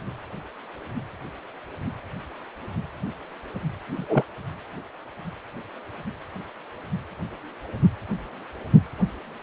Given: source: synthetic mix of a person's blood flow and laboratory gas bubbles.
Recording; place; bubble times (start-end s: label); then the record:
Doppler ultrasound of blood flow; precordium
3.96-4.24 s: bubbles
From the record:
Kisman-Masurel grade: 112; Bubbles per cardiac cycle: 1 to 2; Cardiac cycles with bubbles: 1 to 10%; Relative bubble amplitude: moderate (0.250 to 0.450); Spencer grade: 1 (occasional bubble signal discernible with the cardiac motion signal, with majority of cardiac periods free of bubbles); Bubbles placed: anywhere in the cardiac cycle